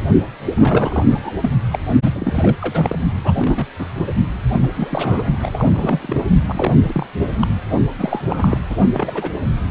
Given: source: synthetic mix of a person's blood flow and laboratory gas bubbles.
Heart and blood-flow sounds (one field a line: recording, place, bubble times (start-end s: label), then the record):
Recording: Doppler ultrasound of blood flow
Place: precordium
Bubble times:
0.44-1.05 s: bubbles
1.09-1.31 s: bubbles
1.42-1.50 s: bubbles
1.72-1.79 s: bubbles
2.04-2.10 s: bubbles
2.13-2.98 s: bubbles
3.24-3.67 s: bubbles
3.78-3.91 s: bubbles
3.98-4.04 s: bubbles
4.54-4.70 s: bubbles
4.74-5.25 s: bubbles
5.42-6.25 s: bubbles
6.47-6.76 s: bubbles
6.84-7.06 s: bubbles
7.18-7.47 s: bubbles
7.99-8.22 s: bubbles
8.29-8.59 s: bubbles
8.70-8.77 s: bubbles
8.92-9.29 s: bubbles
From the record:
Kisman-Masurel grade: 342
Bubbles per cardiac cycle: rolling drumbeat, 9 or more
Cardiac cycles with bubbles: 100%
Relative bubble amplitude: moderate (0.250 to 0.450)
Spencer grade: 3 (all of the cardiac periods contain showers or single bubble signals, but not dominating or overriding the cardiac motion signals)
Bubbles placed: only in the low amplitude regions of the cardiac cycle